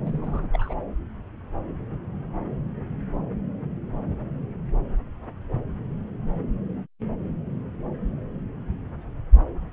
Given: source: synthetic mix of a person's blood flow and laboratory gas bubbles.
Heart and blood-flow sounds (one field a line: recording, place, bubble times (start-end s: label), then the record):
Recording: Doppler ultrasound of blood flow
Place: subclavian vein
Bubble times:
0.05-0.48 s: bubbles
0.53-0.74 s: bubbles
From the record:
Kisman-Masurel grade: 211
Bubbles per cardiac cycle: several, 3 to 8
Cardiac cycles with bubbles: 1 to 10%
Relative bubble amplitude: barely perceptible (0.100 to 0.250)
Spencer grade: 1 (occasional bubble signal discernible with the cardiac motion signal, with majority of cardiac periods free of bubbles)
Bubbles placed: anywhere in the cardiac cycle